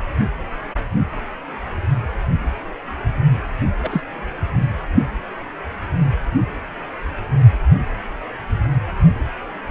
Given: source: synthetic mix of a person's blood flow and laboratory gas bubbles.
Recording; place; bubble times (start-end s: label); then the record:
Doppler ultrasound of blood flow; precordium
3.83-4.02 s: bubbles
From the record:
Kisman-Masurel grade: 122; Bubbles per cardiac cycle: 1 to 2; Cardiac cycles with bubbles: 10 to 50%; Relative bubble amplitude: moderate (0.250 to 0.450); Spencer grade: 2 (many but less than half of the cardiac periods contain bubble signals, singularly or in groups); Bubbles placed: anywhere in the cardiac cycle